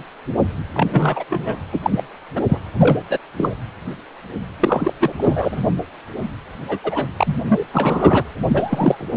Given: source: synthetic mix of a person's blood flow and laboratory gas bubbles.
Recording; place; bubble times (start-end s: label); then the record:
Doppler ultrasound of blood flow; precordium
0.00-0.03 s: bubbles
0.73-1.24 s: bubbles
1.29-1.58 s: bubbles
1.72-2.04 s: bubbles
2.35-2.42 s: bubbles
2.48-2.58 s: bubbles
2.77-3.00 s: bubbles
3.10-3.18 s: bubbles
3.37-3.55 s: bubbles
4.59-4.92 s: bubbles
5.00-5.13 s: bubbles
5.17-5.66 s: bubbles
6.67-6.79 s: bubbles
6.83-7.06 s: bubbles
7.17-7.35 s: bubbles
7.48-7.63 s: bubbles
7.73-8.23 s: bubbles
8.47-9.09 s: bubbles
From the record:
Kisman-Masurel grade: 243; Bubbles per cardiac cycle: several, 3 to 8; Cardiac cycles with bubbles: 100%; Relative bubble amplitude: loud (0.450 to 0.775); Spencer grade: 3 (all of the cardiac periods contain showers or single bubble signals, but not dominating or overriding the cardiac motion signals); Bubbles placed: anywhere in the cardiac cycle